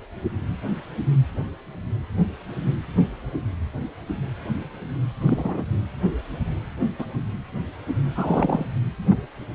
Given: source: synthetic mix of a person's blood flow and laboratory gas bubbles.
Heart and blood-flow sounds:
Doppler ultrasound of blood flow; precordium
5.21-5.65 s: bubbles
6.99-7.06 s: bubbles
8.16-8.65 s: bubbles
9.06-9.27 s: bubbles
From the record:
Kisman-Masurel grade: 122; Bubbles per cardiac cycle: 1 to 2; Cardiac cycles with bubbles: 10 to 50%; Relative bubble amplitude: moderate (0.250 to 0.450); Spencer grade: 2 (many but less than half of the cardiac periods contain bubble signals, singularly or in groups); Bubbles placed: anywhere in the cardiac cycle

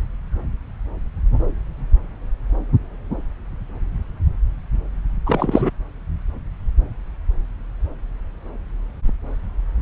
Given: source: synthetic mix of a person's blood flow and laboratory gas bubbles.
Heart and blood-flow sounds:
Doppler ultrasound of blood flow; subclavian vein
5.26-5.70 s: bubbles
From the record:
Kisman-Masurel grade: 213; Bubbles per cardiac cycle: several, 3 to 8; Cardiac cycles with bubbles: 1 to 10%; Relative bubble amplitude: loud (0.450 to 0.775); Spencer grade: 1 (occasional bubble signal discernible with the cardiac motion signal, with majority of cardiac periods free of bubbles); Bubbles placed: anywhere in the cardiac cycle

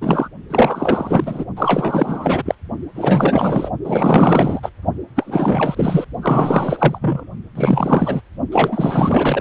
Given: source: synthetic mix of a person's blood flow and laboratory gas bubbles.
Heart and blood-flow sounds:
Doppler ultrasound of blood flow; precordium
0.00-0.29 s: bubbles
0.49-1.45 s: bubbles
1.56-2.42 s: bubbles
2.45-2.55 s: bubbles
2.94-3.71 s: bubbles
3.84-4.60 s: bubbles
4.62-4.69 s: bubbles
5.15-6.04 s: bubbles
6.21-7.26 s: bubbles
7.55-8.21 s: bubbles
8.51-9.41 s: bubbles
From the record:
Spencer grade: 4 (maximum detectable bubble signal sounding continuously throughout systole and diastole of every cardiac period, and overriding the amplitude of the normal cardiac signals); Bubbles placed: only in the low amplitude regions of the cardiac cycle

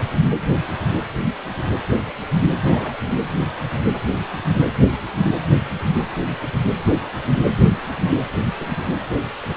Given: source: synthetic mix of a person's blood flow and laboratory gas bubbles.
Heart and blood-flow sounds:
Doppler ultrasound of blood flow; precordium
2.63-2.93 s: bubbles
From the record:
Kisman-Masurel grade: 111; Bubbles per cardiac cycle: 1 to 2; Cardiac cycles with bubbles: 1 to 10%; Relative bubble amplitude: barely perceptible (0.100 to 0.250); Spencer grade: 1 (occasional bubble signal discernible with the cardiac motion signal, with majority of cardiac periods free of bubbles); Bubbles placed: anywhere in the cardiac cycle

